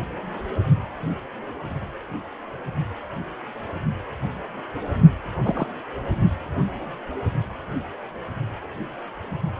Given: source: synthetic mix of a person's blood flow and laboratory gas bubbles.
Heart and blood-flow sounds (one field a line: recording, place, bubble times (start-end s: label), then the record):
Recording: Doppler ultrasound of blood flow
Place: precordium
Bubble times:
5.42-5.67 s: bubbles
From the record:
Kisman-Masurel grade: 112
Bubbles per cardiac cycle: 1 to 2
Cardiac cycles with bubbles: 1 to 10%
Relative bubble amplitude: moderate (0.250 to 0.450)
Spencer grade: 1 (occasional bubble signal discernible with the cardiac motion signal, with majority of cardiac periods free of bubbles)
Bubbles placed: only in the low amplitude regions of the cardiac cycle